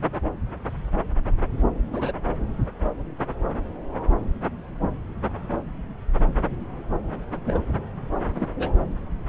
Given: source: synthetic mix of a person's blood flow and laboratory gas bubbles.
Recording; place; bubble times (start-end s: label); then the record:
Doppler ultrasound of blood flow; subclavian vein
1.91-2.12 s: bubbles
7.44-7.59 s: bubbles
8.35-8.48 s: bubbles
8.59-8.72 s: bubbles
From the record:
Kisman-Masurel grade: 122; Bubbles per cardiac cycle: 1 to 2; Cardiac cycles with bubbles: 10 to 50%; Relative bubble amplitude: moderate (0.250 to 0.450); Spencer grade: 2 (many but less than half of the cardiac periods contain bubble signals, singularly or in groups); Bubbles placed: anywhere in the cardiac cycle